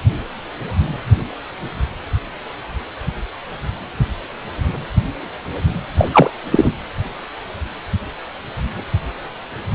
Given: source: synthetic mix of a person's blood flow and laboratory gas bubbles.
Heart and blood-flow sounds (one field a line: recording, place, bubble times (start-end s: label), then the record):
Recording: Doppler ultrasound of blood flow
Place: precordium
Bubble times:
5.97-6.08 s: bubbles
6.12-6.30 s: bubbles
6.51-6.71 s: bubbles
From the record:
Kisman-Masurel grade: 213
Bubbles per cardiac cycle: several, 3 to 8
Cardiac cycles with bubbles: 1 to 10%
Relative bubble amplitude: loud (0.450 to 0.775)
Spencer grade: 1 (occasional bubble signal discernible with the cardiac motion signal, with majority of cardiac periods free of bubbles)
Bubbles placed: anywhere in the cardiac cycle